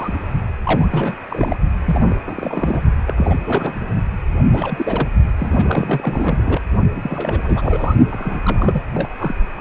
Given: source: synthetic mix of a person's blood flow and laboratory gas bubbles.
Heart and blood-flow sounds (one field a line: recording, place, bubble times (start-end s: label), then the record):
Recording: Doppler ultrasound of blood flow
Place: precordium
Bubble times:
0.00-0.14 s: bubbles
0.64-0.88 s: bubbles
0.90-1.15 s: bubbles
1.29-1.57 s: bubbles
1.84-2.15 s: bubbles
2.27-2.82 s: bubbles
3.06-3.77 s: bubbles
4.51-5.08 s: bubbles
5.38-6.61 s: bubbles
6.95-7.96 s: bubbles
8.11-8.85 s: bubbles
8.94-9.09 s: bubbles
9.18-9.35 s: bubbles
9.55-9.61 s: bubbles
From the record:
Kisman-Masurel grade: 342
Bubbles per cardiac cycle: rolling drumbeat, 9 or more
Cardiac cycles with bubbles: 100%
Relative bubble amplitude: moderate (0.250 to 0.450)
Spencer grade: 3 (all of the cardiac periods contain showers or single bubble signals, but not dominating or overriding the cardiac motion signals)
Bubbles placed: only in the low amplitude regions of the cardiac cycle